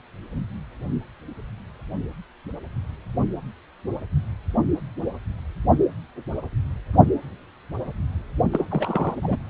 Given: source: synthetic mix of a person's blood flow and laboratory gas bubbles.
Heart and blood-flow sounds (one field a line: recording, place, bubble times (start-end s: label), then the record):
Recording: Doppler ultrasound of blood flow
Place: precordium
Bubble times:
8.52-8.65 s: bubbles
8.71-9.14 s: bubbles
9.22-9.36 s: bubbles
From the record:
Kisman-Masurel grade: 222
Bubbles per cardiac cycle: several, 3 to 8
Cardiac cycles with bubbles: 10 to 50%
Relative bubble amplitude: moderate (0.250 to 0.450)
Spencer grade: 2 (many but less than half of the cardiac periods contain bubble signals, singularly or in groups)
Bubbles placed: only in the low amplitude regions of the cardiac cycle